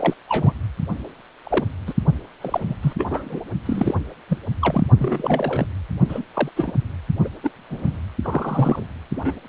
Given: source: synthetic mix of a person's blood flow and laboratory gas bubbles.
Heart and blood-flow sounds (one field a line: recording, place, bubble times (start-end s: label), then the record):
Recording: Doppler ultrasound of blood flow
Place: precordium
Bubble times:
0.00-0.14 s: bubbles
0.28-0.53 s: bubbles
1.44-1.64 s: bubbles
1.86-1.93 s: bubbles
2.41-2.74 s: bubbles
2.82-2.93 s: bubbles
2.97-3.06 s: bubbles
3.09-3.40 s: bubbles
3.65-3.94 s: bubbles
4.28-4.38 s: bubbles
4.62-4.85 s: bubbles
4.98-5.67 s: bubbles
6.09-6.24 s: bubbles
6.33-6.50 s: bubbles
6.56-6.73 s: bubbles
7.24-7.28 s: bubbles
7.43-7.50 s: bubbles
7.70-7.98 s: bubbles
8.23-8.86 s: bubbles
9.15-9.32 s: bubbles
From the record:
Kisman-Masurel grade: 242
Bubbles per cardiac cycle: several, 3 to 8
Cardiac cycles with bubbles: 100%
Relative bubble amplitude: moderate (0.250 to 0.450)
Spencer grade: 3 (all of the cardiac periods contain showers or single bubble signals, but not dominating or overriding the cardiac motion signals)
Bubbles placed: only in the low amplitude regions of the cardiac cycle